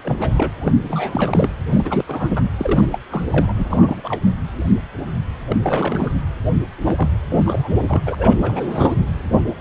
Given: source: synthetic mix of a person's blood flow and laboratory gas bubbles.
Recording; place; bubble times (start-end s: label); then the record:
Doppler ultrasound of blood flow; precordium
0.03-0.52 s: bubbles
0.60-0.72 s: bubbles
0.83-1.50 s: bubbles
1.71-2.04 s: bubbles
2.07-2.42 s: bubbles
2.58-2.87 s: bubbles
2.92-2.98 s: bubbles
3.10-3.23 s: bubbles
3.32-3.53 s: bubbles
3.58-4.01 s: bubbles
4.04-4.21 s: bubbles
5.48-5.57 s: bubbles
5.63-6.14 s: bubbles
6.83-7.08 s: bubbles
7.29-7.73 s: bubbles
7.87-8.02 s: bubbles
8.06-9.07 s: bubbles
9.45-9.54 s: bubbles
From the record:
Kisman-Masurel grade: 332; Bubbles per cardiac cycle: rolling drumbeat, 9 or more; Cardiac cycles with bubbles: 50 to 99%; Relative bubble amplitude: moderate (0.250 to 0.450); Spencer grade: 3 (all of the cardiac periods contain showers or single bubble signals, but not dominating or overriding the cardiac motion signals); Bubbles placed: anywhere in the cardiac cycle